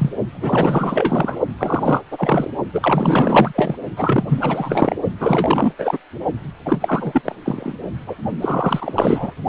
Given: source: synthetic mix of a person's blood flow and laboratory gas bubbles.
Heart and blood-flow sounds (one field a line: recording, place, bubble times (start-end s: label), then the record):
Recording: Doppler ultrasound of blood flow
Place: precordium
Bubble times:
0.00-0.13 s: bubbles
0.33-1.41 s: bubbles
1.58-2.01 s: bubbles
2.11-2.50 s: bubbles
2.73-3.77 s: bubbles
3.96-4.24 s: bubbles
4.28-4.96 s: bubbles
5.20-5.72 s: bubbles
5.78-5.98 s: bubbles
6.65-6.78 s: bubbles
6.80-7.21 s: bubbles
7.25-7.36 s: bubbles
7.45-7.72 s: bubbles
8.06-8.15 s: bubbles
8.41-9.31 s: bubbles
From the record:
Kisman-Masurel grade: 444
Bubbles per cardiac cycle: continuous sound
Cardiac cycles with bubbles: 100%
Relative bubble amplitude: maximal (0.775 to 0.999)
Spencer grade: 4 (maximum detectable bubble signal sounding continuously throughout systole and diastole of every cardiac period, and overriding the amplitude of the normal cardiac signals)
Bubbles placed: only in the low amplitude regions of the cardiac cycle